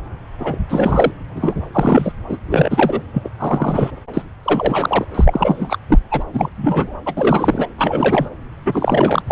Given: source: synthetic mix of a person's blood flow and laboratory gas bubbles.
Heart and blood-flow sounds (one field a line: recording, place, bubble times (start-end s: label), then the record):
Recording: Doppler ultrasound of blood flow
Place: subclavian vein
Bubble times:
0.39-0.58 s: bubbles
0.69-1.11 s: bubbles
1.35-1.54 s: bubbles
1.72-2.12 s: bubbles
2.29-2.37 s: bubbles
2.48-3.01 s: bubbles
3.14-3.29 s: bubbles
3.39-3.90 s: bubbles
4.13-4.22 s: bubbles
4.43-5.05 s: bubbles
5.14-5.78 s: bubbles
5.89-5.99 s: bubbles
6.11-6.24 s: bubbles
6.34-6.49 s: bubbles
6.56-6.93 s: bubbles
7.06-7.14 s: bubbles
7.16-7.67 s: bubbles
7.78-8.29 s: bubbles
8.65-9.22 s: bubbles
9.27-9.32 s: bubbles
From the record:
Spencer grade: 3 (all of the cardiac periods contain showers or single bubble signals, but not dominating or overriding the cardiac motion signals)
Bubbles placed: anywhere in the cardiac cycle